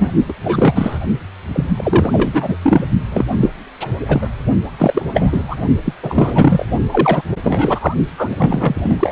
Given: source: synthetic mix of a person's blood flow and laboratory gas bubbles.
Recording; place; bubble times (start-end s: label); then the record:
Doppler ultrasound of blood flow; precordium
0.00-0.11 s: bubbles
0.28-0.34 s: bubbles
0.43-0.99 s: bubbles
1.53-1.65 s: bubbles
1.76-2.56 s: bubbles
2.62-2.85 s: bubbles
3.11-3.25 s: bubbles
3.40-3.49 s: bubbles
3.81-3.87 s: bubbles
4.08-4.27 s: bubbles
4.77-5.03 s: bubbles
5.12-5.42 s: bubbles
5.48-5.55 s: bubbles
5.84-5.93 s: bubbles
6.02-6.66 s: bubbles
6.92-7.22 s: bubbles
7.44-7.94 s: bubbles
8.17-9.12 s: bubbles
From the record:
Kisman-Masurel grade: 343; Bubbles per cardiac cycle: rolling drumbeat, 9 or more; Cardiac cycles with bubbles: 100%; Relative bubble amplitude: loud (0.450 to 0.775); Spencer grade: 3 (all of the cardiac periods contain showers or single bubble signals, but not dominating or overriding the cardiac motion signals); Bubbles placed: only in the low amplitude regions of the cardiac cycle